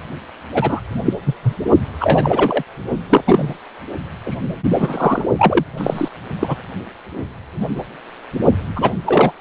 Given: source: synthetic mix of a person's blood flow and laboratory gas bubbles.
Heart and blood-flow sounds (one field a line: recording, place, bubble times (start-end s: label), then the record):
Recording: Doppler ultrasound of blood flow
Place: precordium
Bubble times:
0.51-0.81 s: bubbles
1.06-1.13 s: bubbles
1.26-1.35 s: bubbles
1.42-1.57 s: bubbles
2.00-2.63 s: bubbles
3.09-3.57 s: bubbles
4.25-4.35 s: bubbles
4.75-5.25 s: bubbles
5.38-5.64 s: bubbles
5.77-6.08 s: bubbles
6.39-6.62 s: bubbles
8.76-8.92 s: bubbles
9.06-9.32 s: bubbles
From the record:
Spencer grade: 3 (all of the cardiac periods contain showers or single bubble signals, but not dominating or overriding the cardiac motion signals)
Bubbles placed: only in the low amplitude regions of the cardiac cycle